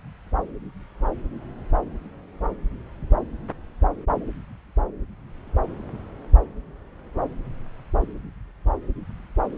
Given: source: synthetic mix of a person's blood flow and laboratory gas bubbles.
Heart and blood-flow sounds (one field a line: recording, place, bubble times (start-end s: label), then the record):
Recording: Doppler ultrasound of blood flow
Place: subclavian vein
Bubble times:
no bubbles
From the record:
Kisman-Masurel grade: 000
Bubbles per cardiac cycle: 0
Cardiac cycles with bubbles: 0%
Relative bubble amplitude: no bubbles discernible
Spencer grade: 0 (complete lack of bubble signals)